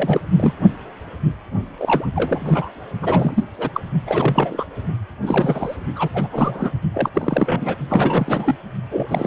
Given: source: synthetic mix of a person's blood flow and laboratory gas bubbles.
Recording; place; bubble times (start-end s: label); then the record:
Doppler ultrasound of blood flow; precordium
0.00-0.20 s: bubbles
0.36-0.53 s: bubbles
1.79-2.07 s: bubbles
2.15-2.69 s: bubbles
3.02-3.44 s: bubbles
3.58-3.69 s: bubbles
3.74-3.80 s: bubbles
4.07-4.65 s: bubbles
5.22-5.76 s: bubbles
5.96-6.08 s: bubbles
6.13-6.27 s: bubbles
6.32-6.71 s: bubbles
6.94-7.09 s: bubbles
7.14-7.75 s: bubbles
7.89-8.56 s: bubbles
8.91-9.27 s: bubbles
From the record:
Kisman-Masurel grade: 332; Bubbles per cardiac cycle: rolling drumbeat, 9 or more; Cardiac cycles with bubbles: 50 to 99%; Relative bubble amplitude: moderate (0.250 to 0.450); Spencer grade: 3 (all of the cardiac periods contain showers or single bubble signals, but not dominating or overriding the cardiac motion signals); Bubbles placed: only in the low amplitude regions of the cardiac cycle